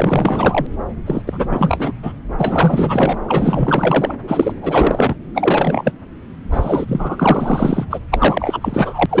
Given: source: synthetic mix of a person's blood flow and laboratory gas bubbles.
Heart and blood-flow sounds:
Doppler ultrasound of blood flow; subclavian vein
0.00-0.66 s: bubbles
1.06-1.22 s: bubbles
1.25-1.93 s: bubbles
2.03-2.13 s: bubbles
2.37-3.17 s: bubbles
3.28-4.15 s: bubbles
4.27-4.53 s: bubbles
4.61-5.15 s: bubbles
5.34-5.92 s: bubbles
6.51-7.86 s: bubbles
7.90-8.00 s: bubbles
8.11-9.06 s: bubbles
9.09-9.20 s: bubbles
From the record:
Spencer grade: 4 (maximum detectable bubble signal sounding continuously throughout systole and diastole of every cardiac period, and overriding the amplitude of the normal cardiac signals); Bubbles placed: anywhere in the cardiac cycle

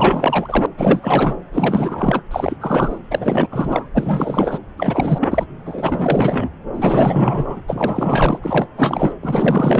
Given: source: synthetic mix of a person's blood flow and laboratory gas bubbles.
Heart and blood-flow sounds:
Doppler ultrasound of blood flow; subclavian vein
0.00-0.66 s: bubbles
0.77-1.37 s: bubbles
1.52-2.22 s: bubbles
2.31-2.56 s: bubbles
2.60-2.98 s: bubbles
3.10-3.48 s: bubbles
3.51-3.89 s: bubbles
3.94-4.58 s: bubbles
4.77-5.46 s: bubbles
5.65-6.50 s: bubbles
6.73-7.62 s: bubbles
7.67-8.39 s: bubbles
8.42-8.67 s: bubbles
8.77-9.12 s: bubbles
9.22-9.80 s: bubbles
From the record:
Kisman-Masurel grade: 444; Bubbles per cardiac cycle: continuous sound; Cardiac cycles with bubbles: 100%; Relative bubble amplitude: maximal (0.775 to 0.999); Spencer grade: 4 (maximum detectable bubble signal sounding continuously throughout systole and diastole of every cardiac period, and overriding the amplitude of the normal cardiac signals); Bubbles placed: anywhere in the cardiac cycle

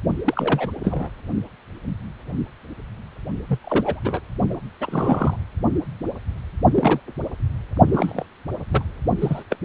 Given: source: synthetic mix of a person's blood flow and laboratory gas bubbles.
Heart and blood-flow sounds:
Doppler ultrasound of blood flow; precordium
0.25-0.71 s: bubbles
0.83-1.09 s: bubbles
3.48-3.58 s: bubbles
3.64-3.99 s: bubbles
4.04-4.20 s: bubbles
4.50-4.56 s: bubbles
4.81-5.36 s: bubbles
6.75-7.00 s: bubbles
7.92-8.26 s: bubbles
8.71-8.83 s: bubbles
9.21-9.43 s: bubbles
9.50-9.56 s: bubbles
From the record:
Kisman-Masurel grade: 222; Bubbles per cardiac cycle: several, 3 to 8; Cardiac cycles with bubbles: 10 to 50%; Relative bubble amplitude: moderate (0.250 to 0.450); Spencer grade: 2 (many but less than half of the cardiac periods contain bubble signals, singularly or in groups); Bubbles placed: only in the low amplitude regions of the cardiac cycle

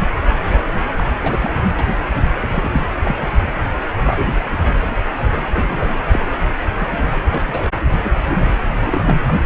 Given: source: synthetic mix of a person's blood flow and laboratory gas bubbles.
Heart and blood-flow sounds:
Doppler ultrasound of blood flow; precordium
0.00-0.08 s: bubbles
0.98-1.04 s: bubbles
1.23-1.54 s: bubbles
1.78-1.97 s: bubbles
2.38-2.86 s: bubbles
3.03-3.27 s: bubbles
3.42-3.47 s: bubbles
4.06-4.25 s: bubbles
4.52-4.57 s: bubbles
5.18-5.45 s: bubbles
5.55-5.99 s: bubbles
6.13-6.32 s: bubbles
6.79-7.29 s: bubbles
7.32-7.70 s: bubbles
8.04-8.10 s: bubbles
8.26-8.46 s: bubbles
8.71-8.77 s: bubbles
8.80-9.16 s: bubbles
9.21-9.37 s: bubbles
From the record:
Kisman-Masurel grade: 242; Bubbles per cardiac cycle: several, 3 to 8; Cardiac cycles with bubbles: 100%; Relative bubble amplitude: moderate (0.250 to 0.450); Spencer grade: 3 (all of the cardiac periods contain showers or single bubble signals, but not dominating or overriding the cardiac motion signals); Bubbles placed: anywhere in the cardiac cycle

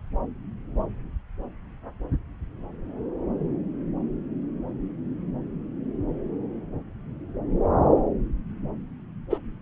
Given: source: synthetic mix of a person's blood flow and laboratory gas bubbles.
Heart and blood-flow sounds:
Doppler ultrasound of blood flow; subclavian vein
9.30-9.38 s: bubbles
From the record:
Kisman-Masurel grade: 122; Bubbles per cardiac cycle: 1 to 2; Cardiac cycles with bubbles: 10 to 50%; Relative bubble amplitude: moderate (0.250 to 0.450); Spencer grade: 2 (many but less than half of the cardiac periods contain bubble signals, singularly or in groups); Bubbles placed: anywhere in the cardiac cycle

